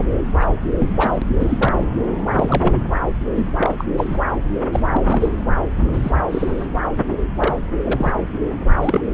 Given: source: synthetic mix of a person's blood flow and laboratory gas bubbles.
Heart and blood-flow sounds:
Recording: Doppler ultrasound of blood flow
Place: subclavian vein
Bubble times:
0.40-0.48 s: bubbles
0.80-1.26 s: bubbles
1.39-1.73 s: bubbles
2.33-2.73 s: bubbles
3.36-3.51 s: bubbles
3.57-3.75 s: bubbles
3.78-3.84 s: bubbles
3.97-4.18 s: bubbles
4.72-4.80 s: bubbles
4.92-5.01 s: bubbles
5.04-5.31 s: bubbles
5.88-6.11 s: bubbles
6.29-6.67 s: bubbles
7.36-7.56 s: bubbles
7.85-8.12 s: bubbles
8.81-9.01 s: bubbles
From the record:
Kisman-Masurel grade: 243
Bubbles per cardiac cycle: several, 3 to 8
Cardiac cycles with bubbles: 100%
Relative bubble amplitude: loud (0.450 to 0.775)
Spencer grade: 3 (all of the cardiac periods contain showers or single bubble signals, but not dominating or overriding the cardiac motion signals)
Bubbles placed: anywhere in the cardiac cycle

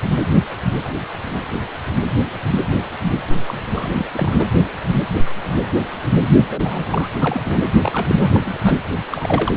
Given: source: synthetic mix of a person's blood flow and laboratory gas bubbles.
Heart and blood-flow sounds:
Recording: Doppler ultrasound of blood flow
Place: precordium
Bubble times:
3.47-3.64 s: bubbles
3.73-4.05 s: bubbles
4.12-4.45 s: bubbles
6.43-7.09 s: bubbles
7.19-7.59 s: bubbles
7.83-8.57 s: bubbles
8.62-8.75 s: bubbles
9.12-9.57 s: bubbles
From the record:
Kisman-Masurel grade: 332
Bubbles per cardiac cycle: rolling drumbeat, 9 or more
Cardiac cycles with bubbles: 50 to 99%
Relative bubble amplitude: moderate (0.250 to 0.450)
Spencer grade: 3 (all of the cardiac periods contain showers or single bubble signals, but not dominating or overriding the cardiac motion signals)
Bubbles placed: only in the low amplitude regions of the cardiac cycle

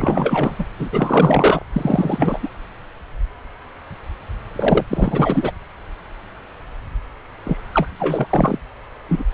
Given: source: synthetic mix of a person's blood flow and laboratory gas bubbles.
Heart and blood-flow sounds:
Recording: Doppler ultrasound of blood flow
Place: subclavian vein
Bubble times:
0.00-0.56 s: bubbles
0.58-0.65 s: bubbles
0.79-0.89 s: bubbles
0.92-1.62 s: bubbles
1.73-2.39 s: bubbles
2.42-2.49 s: bubbles
4.55-4.84 s: bubbles
4.88-5.51 s: bubbles
7.43-7.58 s: bubbles
7.74-7.88 s: bubbles
7.99-8.59 s: bubbles
9.09-9.24 s: bubbles
From the record:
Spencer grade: 3 (all of the cardiac periods contain showers or single bubble signals, but not dominating or overriding the cardiac motion signals)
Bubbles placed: anywhere in the cardiac cycle

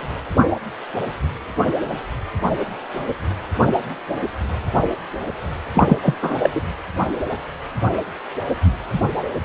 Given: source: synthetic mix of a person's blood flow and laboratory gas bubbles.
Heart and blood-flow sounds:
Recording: Doppler ultrasound of blood flow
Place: precordium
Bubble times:
5.74-5.97 s: bubbles
6.01-6.14 s: bubbles
6.21-6.49 s: bubbles
6.54-6.61 s: bubbles
From the record:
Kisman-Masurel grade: 213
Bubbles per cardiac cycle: several, 3 to 8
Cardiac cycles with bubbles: 1 to 10%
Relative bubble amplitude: loud (0.450 to 0.775)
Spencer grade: 1 (occasional bubble signal discernible with the cardiac motion signal, with majority of cardiac periods free of bubbles)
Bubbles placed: anywhere in the cardiac cycle

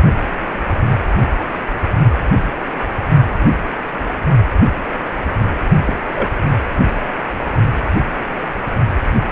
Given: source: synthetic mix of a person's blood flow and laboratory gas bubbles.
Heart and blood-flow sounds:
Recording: Doppler ultrasound of blood flow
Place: precordium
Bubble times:
5.87-5.94 s: bubbles
6.15-6.29 s: bubbles
From the record:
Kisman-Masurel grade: 112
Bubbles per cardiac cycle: 1 to 2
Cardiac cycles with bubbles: 1 to 10%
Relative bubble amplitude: moderate (0.250 to 0.450)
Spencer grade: 1 (occasional bubble signal discernible with the cardiac motion signal, with majority of cardiac periods free of bubbles)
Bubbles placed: only in the low amplitude regions of the cardiac cycle

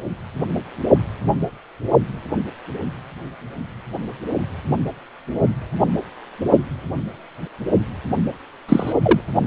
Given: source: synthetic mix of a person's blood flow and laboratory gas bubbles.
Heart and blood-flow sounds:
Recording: Doppler ultrasound of blood flow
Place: precordium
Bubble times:
8.68-8.92 s: bubbles
9.02-9.21 s: bubbles
From the record:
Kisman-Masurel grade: 113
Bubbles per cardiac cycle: 1 to 2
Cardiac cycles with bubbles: 1 to 10%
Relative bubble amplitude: loud (0.450 to 0.775)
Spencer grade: 1 (occasional bubble signal discernible with the cardiac motion signal, with majority of cardiac periods free of bubbles)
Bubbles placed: only in the low amplitude regions of the cardiac cycle

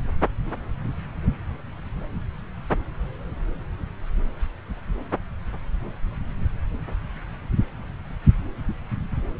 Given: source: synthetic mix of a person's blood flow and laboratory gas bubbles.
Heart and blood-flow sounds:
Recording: Doppler ultrasound of blood flow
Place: subclavian vein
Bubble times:
no bubbles
From the record:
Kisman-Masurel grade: 000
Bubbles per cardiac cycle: 0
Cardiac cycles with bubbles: 0%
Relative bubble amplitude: no bubbles discernible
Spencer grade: 0 (complete lack of bubble signals)

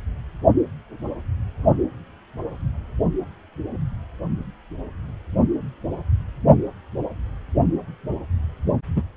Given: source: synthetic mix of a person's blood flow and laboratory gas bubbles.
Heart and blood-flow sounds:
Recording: Doppler ultrasound of blood flow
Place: precordium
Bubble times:
8.96-9.03 s: bubbles
From the record:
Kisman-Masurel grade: 213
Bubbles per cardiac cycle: several, 3 to 8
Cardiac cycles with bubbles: 1 to 10%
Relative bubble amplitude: loud (0.450 to 0.775)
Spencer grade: 1 (occasional bubble signal discernible with the cardiac motion signal, with majority of cardiac periods free of bubbles)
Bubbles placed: only in the low amplitude regions of the cardiac cycle

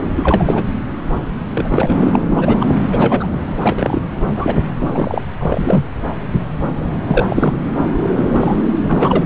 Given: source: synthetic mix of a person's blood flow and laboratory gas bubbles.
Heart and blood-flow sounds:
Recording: Doppler ultrasound of blood flow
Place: subclavian vein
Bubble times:
0.15-0.63 s: bubbles
1.54-1.94 s: bubbles
2.01-2.16 s: bubbles
2.28-2.67 s: bubbles
2.92-3.27 s: bubbles
3.32-3.40 s: bubbles
3.62-4.00 s: bubbles
4.35-4.55 s: bubbles
4.80-5.24 s: bubbles
5.40-5.84 s: bubbles
7.04-7.53 s: bubbles
8.30-8.62 s: bubbles
8.83-9.26 s: bubbles
From the record:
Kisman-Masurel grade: 233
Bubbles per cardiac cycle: several, 3 to 8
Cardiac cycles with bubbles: 50 to 99%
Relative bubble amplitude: loud (0.450 to 0.775)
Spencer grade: 3 (all of the cardiac periods contain showers or single bubble signals, but not dominating or overriding the cardiac motion signals)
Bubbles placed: anywhere in the cardiac cycle

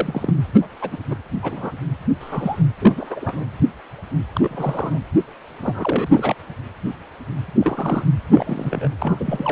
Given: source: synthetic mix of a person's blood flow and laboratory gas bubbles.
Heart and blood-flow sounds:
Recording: Doppler ultrasound of blood flow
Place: precordium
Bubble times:
0.00-0.34 s: bubbles
0.54-0.68 s: bubbles
0.81-0.97 s: bubbles
1.07-1.16 s: bubbles
1.42-1.71 s: bubbles
2.20-2.62 s: bubbles
2.79-3.46 s: bubbles
4.34-4.99 s: bubbles
5.62-6.34 s: bubbles
7.60-8.06 s: bubbles
8.33-8.88 s: bubbles
9.02-9.52 s: bubbles
From the record:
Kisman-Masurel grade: 232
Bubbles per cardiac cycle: several, 3 to 8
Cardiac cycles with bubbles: 50 to 99%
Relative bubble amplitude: moderate (0.250 to 0.450)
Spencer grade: 3 (all of the cardiac periods contain showers or single bubble signals, but not dominating or overriding the cardiac motion signals)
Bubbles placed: anywhere in the cardiac cycle

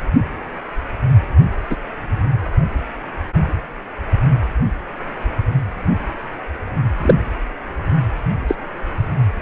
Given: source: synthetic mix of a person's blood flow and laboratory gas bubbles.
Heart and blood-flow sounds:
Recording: Doppler ultrasound of blood flow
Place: precordium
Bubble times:
1.70-1.76 s: bubbles
7.02-7.14 s: bubbles
8.47-8.55 s: bubbles
From the record:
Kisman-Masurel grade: 123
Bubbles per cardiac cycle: 1 to 2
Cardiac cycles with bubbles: 10 to 50%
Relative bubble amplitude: loud (0.450 to 0.775)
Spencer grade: 2 (many but less than half of the cardiac periods contain bubble signals, singularly or in groups)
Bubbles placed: anywhere in the cardiac cycle

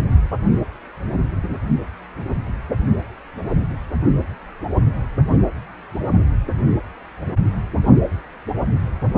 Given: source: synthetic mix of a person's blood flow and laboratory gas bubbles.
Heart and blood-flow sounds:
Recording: Doppler ultrasound of blood flow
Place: precordium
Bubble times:
no bubbles
From the record:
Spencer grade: 0 (complete lack of bubble signals)

